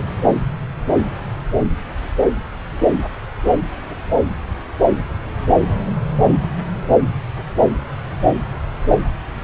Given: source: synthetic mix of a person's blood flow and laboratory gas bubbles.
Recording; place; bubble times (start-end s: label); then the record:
Doppler ultrasound of blood flow; subclavian vein
no bubbles
From the record:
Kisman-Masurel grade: 000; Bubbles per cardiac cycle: 0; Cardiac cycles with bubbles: 0%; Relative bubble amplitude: no bubbles discernible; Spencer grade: 0 (complete lack of bubble signals)